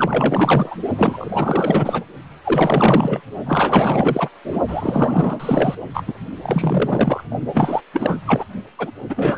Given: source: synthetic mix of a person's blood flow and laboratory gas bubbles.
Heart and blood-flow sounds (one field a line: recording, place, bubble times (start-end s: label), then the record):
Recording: Doppler ultrasound of blood flow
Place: precordium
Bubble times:
0.00-0.76 s: bubbles
0.97-2.05 s: bubbles
2.44-3.21 s: bubbles
3.45-4.30 s: bubbles
4.44-4.60 s: bubbles
4.67-5.75 s: bubbles
5.94-6.03 s: bubbles
6.07-6.14 s: bubbles
6.42-7.24 s: bubbles
7.54-7.82 s: bubbles
7.93-8.20 s: bubbles
8.26-8.45 s: bubbles
8.78-8.91 s: bubbles
9.09-9.38 s: bubbles
From the record:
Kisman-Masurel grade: 444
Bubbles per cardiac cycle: continuous sound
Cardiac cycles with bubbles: 100%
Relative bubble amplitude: maximal (0.775 to 0.999)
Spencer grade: 4 (maximum detectable bubble signal sounding continuously throughout systole and diastole of every cardiac period, and overriding the amplitude of the normal cardiac signals)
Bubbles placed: only in the low amplitude regions of the cardiac cycle